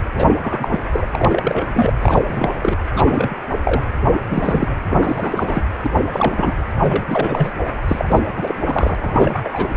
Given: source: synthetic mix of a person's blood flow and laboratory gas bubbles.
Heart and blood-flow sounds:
Doppler ultrasound of blood flow; precordium
0.14-0.38 s: bubbles
0.41-0.79 s: bubbles
0.93-1.05 s: bubbles
1.11-1.67 s: bubbles
1.73-1.94 s: bubbles
2.02-2.22 s: bubbles
2.28-2.52 s: bubbles
2.62-2.77 s: bubbles
2.94-3.36 s: bubbles
3.65-3.84 s: bubbles
4.10-4.20 s: bubbles
4.30-4.76 s: bubbles
4.90-5.62 s: bubbles
5.83-5.90 s: bubbles
6.12-6.54 s: bubbles
6.81-7.51 s: bubbles
7.88-8.20 s: bubbles
8.36-8.54 s: bubbles
8.65-9.69 s: bubbles
From the record:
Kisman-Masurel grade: 342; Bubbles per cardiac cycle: rolling drumbeat, 9 or more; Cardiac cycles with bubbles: 100%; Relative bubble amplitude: moderate (0.250 to 0.450); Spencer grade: 3 (all of the cardiac periods contain showers or single bubble signals, but not dominating or overriding the cardiac motion signals); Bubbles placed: anywhere in the cardiac cycle

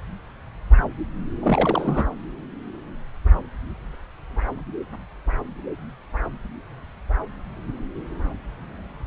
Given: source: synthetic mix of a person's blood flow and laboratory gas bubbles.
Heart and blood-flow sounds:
Doppler ultrasound of blood flow; subclavian vein
1.40-2.04 s: bubbles
From the record:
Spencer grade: 1 (occasional bubble signal discernible with the cardiac motion signal, with majority of cardiac periods free of bubbles); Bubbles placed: anywhere in the cardiac cycle

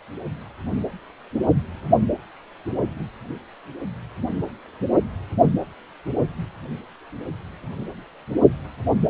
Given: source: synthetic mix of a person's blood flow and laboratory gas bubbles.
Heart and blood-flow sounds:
Doppler ultrasound of blood flow; precordium
no bubbles
From the record:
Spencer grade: 0 (complete lack of bubble signals)

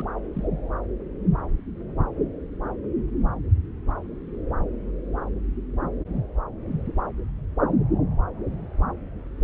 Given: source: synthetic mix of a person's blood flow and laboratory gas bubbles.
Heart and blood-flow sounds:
Doppler ultrasound of blood flow; subclavian vein
0.00-0.05 s: bubbles
0.36-0.47 s: bubbles
From the record:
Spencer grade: 1 (occasional bubble signal discernible with the cardiac motion signal, with majority of cardiac periods free of bubbles); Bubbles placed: anywhere in the cardiac cycle

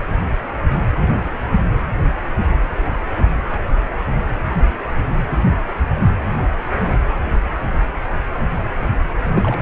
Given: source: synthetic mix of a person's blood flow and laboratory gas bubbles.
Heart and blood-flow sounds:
Doppler ultrasound of blood flow; precordium
9.26-9.62 s: bubbles
From the record:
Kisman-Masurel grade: 211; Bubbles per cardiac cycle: several, 3 to 8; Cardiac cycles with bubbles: 1 to 10%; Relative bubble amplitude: barely perceptible (0.100 to 0.250); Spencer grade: 1 (occasional bubble signal discernible with the cardiac motion signal, with majority of cardiac periods free of bubbles); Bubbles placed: anywhere in the cardiac cycle

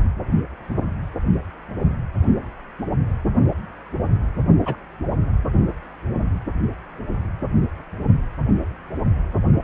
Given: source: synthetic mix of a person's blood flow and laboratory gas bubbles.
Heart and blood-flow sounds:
Doppler ultrasound of blood flow; precordium
4.66-4.75 s: bubbles
From the record:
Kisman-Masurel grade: 111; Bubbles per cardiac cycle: 1 to 2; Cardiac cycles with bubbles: 1 to 10%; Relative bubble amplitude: barely perceptible (0.100 to 0.250); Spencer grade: 1 (occasional bubble signal discernible with the cardiac motion signal, with majority of cardiac periods free of bubbles); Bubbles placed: only in the low amplitude regions of the cardiac cycle

